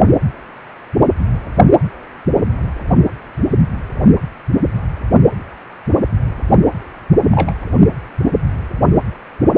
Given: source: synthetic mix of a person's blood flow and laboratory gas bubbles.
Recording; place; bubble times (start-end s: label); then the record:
Doppler ultrasound of blood flow; precordium
7.31-7.53 s: bubbles
From the record:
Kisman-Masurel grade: 113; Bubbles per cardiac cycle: 1 to 2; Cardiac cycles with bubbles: 1 to 10%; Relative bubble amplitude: loud (0.450 to 0.775); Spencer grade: 1 (occasional bubble signal discernible with the cardiac motion signal, with majority of cardiac periods free of bubbles); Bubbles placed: only in the low amplitude regions of the cardiac cycle